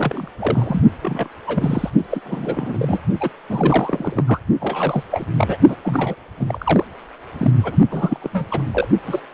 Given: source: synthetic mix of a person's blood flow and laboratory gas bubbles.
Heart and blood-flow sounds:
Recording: Doppler ultrasound of blood flow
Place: precordium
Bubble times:
0.00-0.28 s: bubbles
0.39-0.83 s: bubbles
1.02-1.29 s: bubbles
1.47-1.90 s: bubbles
2.10-2.20 s: bubbles
2.25-2.99 s: bubbles
3.20-3.29 s: bubbles
3.49-4.24 s: bubbles
4.27-4.40 s: bubbles
4.61-5.04 s: bubbles
5.11-5.25 s: bubbles
5.37-5.58 s: bubbles
5.67-5.76 s: bubbles
5.83-6.15 s: bubbles
6.40-6.85 s: bubbles
7.38-7.51 s: bubbles
7.63-7.76 s: bubbles
7.91-8.29 s: bubbles
8.32-8.46 s: bubbles
8.51-8.63 s: bubbles
8.71-8.88 s: bubbles
9.05-9.20 s: bubbles
From the record:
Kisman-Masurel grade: 342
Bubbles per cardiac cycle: rolling drumbeat, 9 or more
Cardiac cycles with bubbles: 100%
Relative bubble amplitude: moderate (0.250 to 0.450)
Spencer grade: 3 (all of the cardiac periods contain showers or single bubble signals, but not dominating or overriding the cardiac motion signals)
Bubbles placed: only in the low amplitude regions of the cardiac cycle

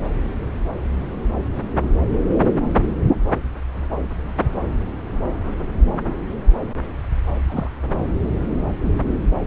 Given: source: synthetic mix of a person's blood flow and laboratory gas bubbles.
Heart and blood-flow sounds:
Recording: Doppler ultrasound of blood flow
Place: subclavian vein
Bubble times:
7.48-7.69 s: bubbles
From the record:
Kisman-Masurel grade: 112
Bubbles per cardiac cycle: 1 to 2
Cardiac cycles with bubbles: 1 to 10%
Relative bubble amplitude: moderate (0.250 to 0.450)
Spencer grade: 1 (occasional bubble signal discernible with the cardiac motion signal, with majority of cardiac periods free of bubbles)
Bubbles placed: anywhere in the cardiac cycle

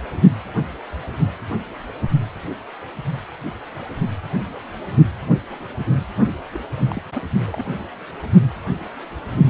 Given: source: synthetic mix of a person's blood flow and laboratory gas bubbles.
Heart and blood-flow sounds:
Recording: Doppler ultrasound of blood flow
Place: precordium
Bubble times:
6.52-6.60 s: bubbles
6.78-6.85 s: bubbles
6.89-7.02 s: bubbles
7.14-7.21 s: bubbles
7.47-7.64 s: bubbles
From the record:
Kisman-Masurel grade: 211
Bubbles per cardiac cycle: several, 3 to 8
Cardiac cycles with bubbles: 1 to 10%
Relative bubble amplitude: barely perceptible (0.100 to 0.250)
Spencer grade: 1 (occasional bubble signal discernible with the cardiac motion signal, with majority of cardiac periods free of bubbles)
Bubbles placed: anywhere in the cardiac cycle

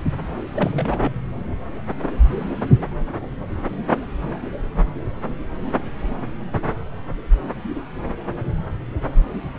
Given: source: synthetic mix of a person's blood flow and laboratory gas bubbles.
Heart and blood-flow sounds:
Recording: Doppler ultrasound of blood flow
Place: subclavian vein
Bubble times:
0.55-1.12 s: bubbles
From the record:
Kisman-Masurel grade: 221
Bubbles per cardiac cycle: several, 3 to 8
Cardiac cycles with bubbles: 10 to 50%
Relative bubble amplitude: barely perceptible (0.100 to 0.250)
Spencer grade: 2 (many but less than half of the cardiac periods contain bubble signals, singularly or in groups)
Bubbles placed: anywhere in the cardiac cycle

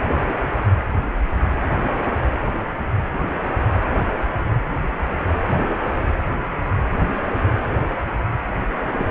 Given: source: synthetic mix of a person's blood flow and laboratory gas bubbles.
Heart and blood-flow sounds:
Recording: Doppler ultrasound of blood flow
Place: precordium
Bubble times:
8.99-9.04 s: bubbles
From the record:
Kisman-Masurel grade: 213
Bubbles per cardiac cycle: several, 3 to 8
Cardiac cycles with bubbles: 1 to 10%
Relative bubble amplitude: loud (0.450 to 0.775)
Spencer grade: 1 (occasional bubble signal discernible with the cardiac motion signal, with majority of cardiac periods free of bubbles)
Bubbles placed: anywhere in the cardiac cycle

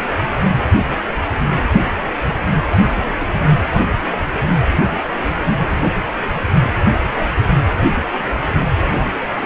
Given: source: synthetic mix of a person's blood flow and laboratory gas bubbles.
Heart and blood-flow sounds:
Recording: Doppler ultrasound of blood flow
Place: precordium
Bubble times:
2.69-3.33 s: bubbles
From the record:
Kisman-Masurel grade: 211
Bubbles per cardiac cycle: several, 3 to 8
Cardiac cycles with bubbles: 1 to 10%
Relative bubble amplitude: barely perceptible (0.100 to 0.250)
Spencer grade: 1 (occasional bubble signal discernible with the cardiac motion signal, with majority of cardiac periods free of bubbles)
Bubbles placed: anywhere in the cardiac cycle

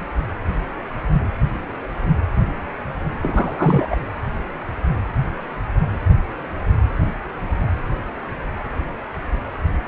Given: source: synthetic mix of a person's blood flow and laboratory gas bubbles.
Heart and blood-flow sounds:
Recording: Doppler ultrasound of blood flow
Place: precordium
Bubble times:
3.22-3.96 s: bubbles
From the record:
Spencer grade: 2 (many but less than half of the cardiac periods contain bubble signals, singularly or in groups)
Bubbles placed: anywhere in the cardiac cycle

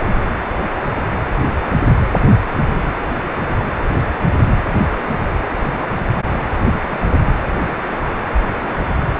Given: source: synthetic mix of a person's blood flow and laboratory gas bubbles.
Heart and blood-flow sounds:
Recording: Doppler ultrasound of blood flow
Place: precordium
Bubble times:
5.51-5.83 s: bubbles
6.62-6.68 s: bubbles
6.91-7.00 s: bubbles
7.16-7.32 s: bubbles
7.42-8.12 s: bubbles
8.34-8.38 s: bubbles
8.57-8.73 s: bubbles
8.78-8.89 s: bubbles
From the record:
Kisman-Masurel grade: 221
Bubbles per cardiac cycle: several, 3 to 8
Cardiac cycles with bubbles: 10 to 50%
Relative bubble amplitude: barely perceptible (0.100 to 0.250)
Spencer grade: 2 (many but less than half of the cardiac periods contain bubble signals, singularly or in groups)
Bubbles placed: anywhere in the cardiac cycle

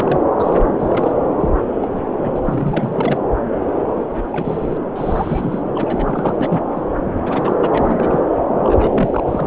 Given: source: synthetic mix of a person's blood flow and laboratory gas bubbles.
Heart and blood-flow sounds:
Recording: Doppler ultrasound of blood flow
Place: subclavian vein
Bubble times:
0.00-0.20 s: bubbles
0.39-0.59 s: bubbles
0.79-1.11 s: bubbles
1.39-1.50 s: bubbles
1.82-1.88 s: bubbles
1.92-2.02 s: bubbles
2.17-2.39 s: bubbles
2.45-3.18 s: bubbles
3.79-3.83 s: bubbles
3.96-4.82 s: bubbles
4.96-5.63 s: bubbles
5.75-6.62 s: bubbles
6.75-6.83 s: bubbles
7.17-7.54 s: bubbles
7.61-8.20 s: bubbles
8.63-9.23 s: bubbles
9.27-9.47 s: bubbles
From the record:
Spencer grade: 3 (all of the cardiac periods contain showers or single bubble signals, but not dominating or overriding the cardiac motion signals)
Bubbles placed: anywhere in the cardiac cycle

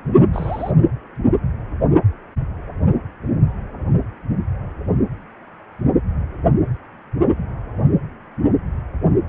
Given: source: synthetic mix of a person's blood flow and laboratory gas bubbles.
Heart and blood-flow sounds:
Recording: Doppler ultrasound of blood flow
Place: precordium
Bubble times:
0.33-0.71 s: bubbles
From the record:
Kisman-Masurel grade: 211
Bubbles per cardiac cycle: several, 3 to 8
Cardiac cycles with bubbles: 1 to 10%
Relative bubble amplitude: barely perceptible (0.100 to 0.250)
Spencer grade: 1 (occasional bubble signal discernible with the cardiac motion signal, with majority of cardiac periods free of bubbles)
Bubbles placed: anywhere in the cardiac cycle

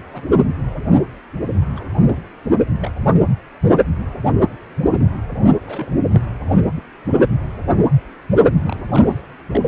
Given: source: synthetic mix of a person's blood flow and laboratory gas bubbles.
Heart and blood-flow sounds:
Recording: Doppler ultrasound of blood flow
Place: precordium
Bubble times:
0.13-0.22 s: bubbles
1.76-1.85 s: bubbles
2.03-2.22 s: bubbles
2.79-2.91 s: bubbles
2.94-2.98 s: bubbles
5.65-6.00 s: bubbles
6.09-6.22 s: bubbles
6.75-6.83 s: bubbles
8.64-8.80 s: bubbles
8.92-9.21 s: bubbles
9.53-9.61 s: bubbles
From the record:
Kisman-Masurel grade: 221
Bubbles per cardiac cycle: several, 3 to 8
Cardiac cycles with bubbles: 10 to 50%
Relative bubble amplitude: barely perceptible (0.100 to 0.250)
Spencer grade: 2 (many but less than half of the cardiac periods contain bubble signals, singularly or in groups)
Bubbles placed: only in the low amplitude regions of the cardiac cycle

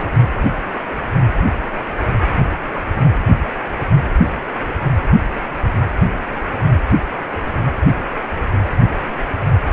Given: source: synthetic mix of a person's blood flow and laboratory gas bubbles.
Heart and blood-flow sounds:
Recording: Doppler ultrasound of blood flow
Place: precordium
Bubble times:
0.00-0.09 s: bubbles
6.66-6.81 s: bubbles
From the record:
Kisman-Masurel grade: 121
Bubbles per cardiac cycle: 1 to 2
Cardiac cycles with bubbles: 10 to 50%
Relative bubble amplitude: barely perceptible (0.100 to 0.250)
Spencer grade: 2 (many but less than half of the cardiac periods contain bubble signals, singularly or in groups)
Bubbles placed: anywhere in the cardiac cycle

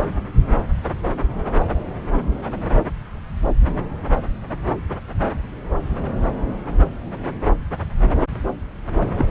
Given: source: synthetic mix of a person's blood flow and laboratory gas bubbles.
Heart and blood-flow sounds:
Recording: Doppler ultrasound of blood flow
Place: subclavian vein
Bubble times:
9.18-9.25 s: bubbles
From the record:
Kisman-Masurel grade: 212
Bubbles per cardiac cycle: several, 3 to 8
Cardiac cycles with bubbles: 1 to 10%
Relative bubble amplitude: moderate (0.250 to 0.450)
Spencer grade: 1 (occasional bubble signal discernible with the cardiac motion signal, with majority of cardiac periods free of bubbles)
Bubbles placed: anywhere in the cardiac cycle

